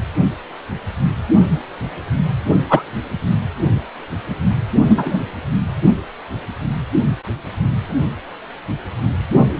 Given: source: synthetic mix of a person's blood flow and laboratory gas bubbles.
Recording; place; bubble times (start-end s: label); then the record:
Doppler ultrasound of blood flow; precordium
2.69-2.82 s: bubbles
4.88-5.19 s: bubbles
From the record:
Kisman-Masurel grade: 123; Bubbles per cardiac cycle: 1 to 2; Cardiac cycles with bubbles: 10 to 50%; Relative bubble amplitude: loud (0.450 to 0.775); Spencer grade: 2 (many but less than half of the cardiac periods contain bubble signals, singularly or in groups); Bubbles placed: anywhere in the cardiac cycle